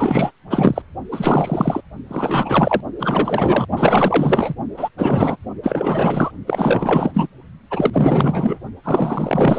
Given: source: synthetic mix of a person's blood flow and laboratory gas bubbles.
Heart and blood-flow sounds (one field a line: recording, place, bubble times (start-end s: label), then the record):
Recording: Doppler ultrasound of blood flow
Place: precordium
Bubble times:
0.00-0.31 s: bubbles
0.50-0.82 s: bubbles
1.11-1.81 s: bubbles
2.08-2.81 s: bubbles
2.99-3.67 s: bubbles
3.77-4.55 s: bubbles
4.77-4.88 s: bubbles
4.98-5.38 s: bubbles
5.62-6.32 s: bubbles
6.47-7.11 s: bubbles
7.14-7.28 s: bubbles
7.70-7.90 s: bubbles
7.93-8.60 s: bubbles
8.84-9.59 s: bubbles
From the record:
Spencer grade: 4 (maximum detectable bubble signal sounding continuously throughout systole and diastole of every cardiac period, and overriding the amplitude of the normal cardiac signals)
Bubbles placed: only in the low amplitude regions of the cardiac cycle